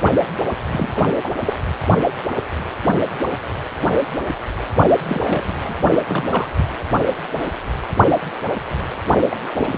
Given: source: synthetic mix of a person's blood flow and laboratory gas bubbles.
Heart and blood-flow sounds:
Doppler ultrasound of blood flow; precordium
0.67-1.10 s: bubbles
1.17-1.31 s: bubbles
1.36-1.42 s: bubbles
1.46-1.54 s: bubbles
5.05-5.76 s: bubbles
6.08-6.75 s: bubbles
9.30-9.36 s: bubbles
9.57-9.78 s: bubbles
From the record:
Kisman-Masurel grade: 221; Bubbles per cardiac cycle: several, 3 to 8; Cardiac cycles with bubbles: 10 to 50%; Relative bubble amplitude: barely perceptible (0.100 to 0.250); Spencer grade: 2 (many but less than half of the cardiac periods contain bubble signals, singularly or in groups); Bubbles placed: only in the low amplitude regions of the cardiac cycle

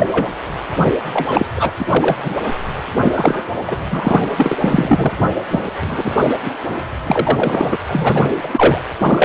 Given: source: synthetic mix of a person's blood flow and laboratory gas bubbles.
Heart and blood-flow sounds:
Doppler ultrasound of blood flow; precordium
0.00-0.07 s: bubbles
0.11-0.26 s: bubbles
0.79-0.91 s: bubbles
1.13-1.46 s: bubbles
1.56-1.72 s: bubbles
1.79-1.85 s: bubbles
1.89-2.16 s: bubbles
2.20-2.34 s: bubbles
3.02-3.52 s: bubbles
3.67-3.76 s: bubbles
3.91-4.19 s: bubbles
4.37-4.56 s: bubbles
4.60-5.12 s: bubbles
5.51-5.63 s: bubbles
5.83-6.37 s: bubbles
6.45-6.51 s: bubbles
7.05-7.78 s: bubbles
7.88-8.29 s: bubbles
8.43-8.48 s: bubbles
8.51-8.81 s: bubbles
9.02-9.25 s: bubbles
From the record:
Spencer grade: 3 (all of the cardiac periods contain showers or single bubble signals, but not dominating or overriding the cardiac motion signals); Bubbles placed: anywhere in the cardiac cycle

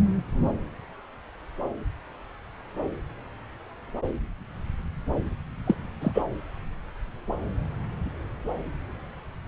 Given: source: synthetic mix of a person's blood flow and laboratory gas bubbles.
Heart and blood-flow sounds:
Doppler ultrasound of blood flow; subclavian vein
5.66-5.75 s: bubbles
6.01-6.22 s: bubbles
From the record:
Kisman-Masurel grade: 212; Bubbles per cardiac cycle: several, 3 to 8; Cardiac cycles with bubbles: 1 to 10%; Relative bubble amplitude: moderate (0.250 to 0.450); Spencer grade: 1 (occasional bubble signal discernible with the cardiac motion signal, with majority of cardiac periods free of bubbles); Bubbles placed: anywhere in the cardiac cycle

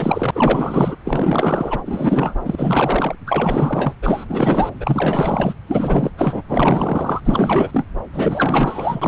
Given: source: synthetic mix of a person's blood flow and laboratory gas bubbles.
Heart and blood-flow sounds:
Doppler ultrasound of blood flow; subclavian vein
0.00-0.96 s: bubbles
1.05-1.82 s: bubbles
1.85-2.34 s: bubbles
2.44-3.15 s: bubbles
3.26-3.94 s: bubbles
4.02-4.25 s: bubbles
4.27-4.69 s: bubbles
4.80-5.54 s: bubbles
5.67-6.10 s: bubbles
6.17-6.42 s: bubbles
6.48-7.20 s: bubbles
7.24-7.86 s: bubbles
8.12-9.08 s: bubbles
From the record:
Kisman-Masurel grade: 444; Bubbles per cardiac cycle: continuous sound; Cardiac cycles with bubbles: 100%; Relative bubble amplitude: maximal (0.775 to 0.999); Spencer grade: 4 (maximum detectable bubble signal sounding continuously throughout systole and diastole of every cardiac period, and overriding the amplitude of the normal cardiac signals); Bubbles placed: anywhere in the cardiac cycle

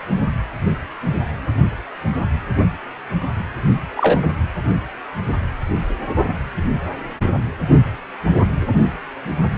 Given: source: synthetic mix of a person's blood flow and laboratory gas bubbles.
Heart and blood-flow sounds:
Doppler ultrasound of blood flow; precordium
3.97-4.29 s: bubbles
From the record:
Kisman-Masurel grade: 113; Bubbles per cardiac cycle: 1 to 2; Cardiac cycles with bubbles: 1 to 10%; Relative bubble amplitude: loud (0.450 to 0.775); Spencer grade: 1 (occasional bubble signal discernible with the cardiac motion signal, with majority of cardiac periods free of bubbles); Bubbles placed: only in the low amplitude regions of the cardiac cycle

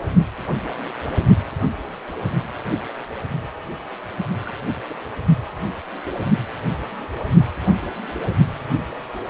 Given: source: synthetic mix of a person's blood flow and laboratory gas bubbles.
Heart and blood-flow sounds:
Doppler ultrasound of blood flow; precordium
4.45-4.53 s: bubbles
4.88-4.95 s: bubbles
From the record:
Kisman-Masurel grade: 111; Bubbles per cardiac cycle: 1 to 2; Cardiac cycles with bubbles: 1 to 10%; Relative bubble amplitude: barely perceptible (0.100 to 0.250); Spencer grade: 1 (occasional bubble signal discernible with the cardiac motion signal, with majority of cardiac periods free of bubbles); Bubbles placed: only in the low amplitude regions of the cardiac cycle

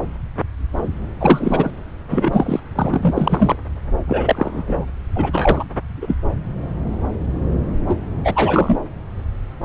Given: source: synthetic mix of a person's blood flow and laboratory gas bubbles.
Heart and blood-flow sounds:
Doppler ultrasound of blood flow; subclavian vein
1.19-1.71 s: bubbles
2.09-2.60 s: bubbles
2.75-3.56 s: bubbles
4.07-4.63 s: bubbles
4.67-4.85 s: bubbles
5.15-5.67 s: bubbles
6.01-6.17 s: bubbles
7.87-8.00 s: bubbles
8.24-8.78 s: bubbles
From the record:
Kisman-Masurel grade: 233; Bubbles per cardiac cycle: several, 3 to 8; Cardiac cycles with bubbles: 50 to 99%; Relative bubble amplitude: loud (0.450 to 0.775); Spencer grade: 3 (all of the cardiac periods contain showers or single bubble signals, but not dominating or overriding the cardiac motion signals); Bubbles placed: anywhere in the cardiac cycle

